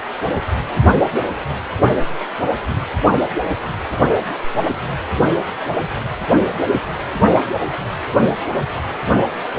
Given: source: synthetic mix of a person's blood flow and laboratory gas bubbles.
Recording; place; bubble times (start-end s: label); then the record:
Doppler ultrasound of blood flow; precordium
no bubbles
From the record:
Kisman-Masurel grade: 000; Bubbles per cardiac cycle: 0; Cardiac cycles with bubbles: 0%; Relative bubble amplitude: no bubbles discernible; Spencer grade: 0 (complete lack of bubble signals)